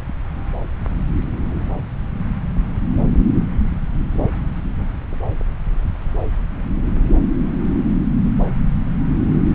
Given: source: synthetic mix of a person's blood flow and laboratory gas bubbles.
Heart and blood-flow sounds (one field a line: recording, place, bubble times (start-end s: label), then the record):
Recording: Doppler ultrasound of blood flow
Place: subclavian vein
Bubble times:
7.82-7.98 s: bubbles
From the record:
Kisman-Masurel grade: 111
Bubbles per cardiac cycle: 1 to 2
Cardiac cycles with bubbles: 1 to 10%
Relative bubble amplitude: barely perceptible (0.100 to 0.250)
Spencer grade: 1 (occasional bubble signal discernible with the cardiac motion signal, with majority of cardiac periods free of bubbles)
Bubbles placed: anywhere in the cardiac cycle